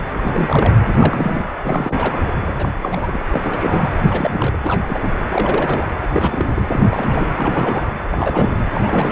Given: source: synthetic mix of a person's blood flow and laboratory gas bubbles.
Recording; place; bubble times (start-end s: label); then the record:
Doppler ultrasound of blood flow; precordium
0.21-0.79 s: bubbles
0.86-1.50 s: bubbles
1.63-2.21 s: bubbles
2.46-2.54 s: bubbles
2.56-2.71 s: bubbles
2.81-3.19 s: bubbles
3.33-3.96 s: bubbles
4.03-4.57 s: bubbles
4.64-4.83 s: bubbles
4.88-5.08 s: bubbles
5.29-5.88 s: bubbles
6.02-6.06 s: bubbles
6.08-6.67 s: bubbles
6.70-7.29 s: bubbles
7.36-7.86 s: bubbles
8.10-8.58 s: bubbles
8.73-9.12 s: bubbles
From the record:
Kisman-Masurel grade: 342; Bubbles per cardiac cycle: rolling drumbeat, 9 or more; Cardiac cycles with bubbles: 100%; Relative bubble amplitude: moderate (0.250 to 0.450); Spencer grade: 3 (all of the cardiac periods contain showers or single bubble signals, but not dominating or overriding the cardiac motion signals); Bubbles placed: anywhere in the cardiac cycle